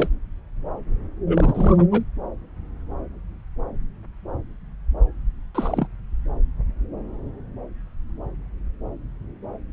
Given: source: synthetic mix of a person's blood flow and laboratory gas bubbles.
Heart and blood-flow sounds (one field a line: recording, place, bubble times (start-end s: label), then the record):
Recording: Doppler ultrasound of blood flow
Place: subclavian vein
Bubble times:
0.00-0.08 s: bubbles
1.27-1.84 s: bubbles
1.92-2.02 s: bubbles
5.54-5.87 s: bubbles
From the record:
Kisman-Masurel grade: 222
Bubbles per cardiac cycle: several, 3 to 8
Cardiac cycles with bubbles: 10 to 50%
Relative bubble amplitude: moderate (0.250 to 0.450)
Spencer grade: 2 (many but less than half of the cardiac periods contain bubble signals, singularly or in groups)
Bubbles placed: anywhere in the cardiac cycle